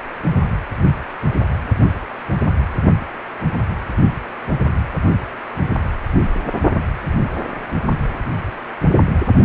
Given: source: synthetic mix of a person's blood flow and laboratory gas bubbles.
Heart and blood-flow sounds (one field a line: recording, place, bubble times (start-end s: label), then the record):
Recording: Doppler ultrasound of blood flow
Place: precordium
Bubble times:
no bubbles
From the record:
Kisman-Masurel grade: 000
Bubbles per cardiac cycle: 0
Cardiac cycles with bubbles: 0%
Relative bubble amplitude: no bubbles discernible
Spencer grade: 0 (complete lack of bubble signals)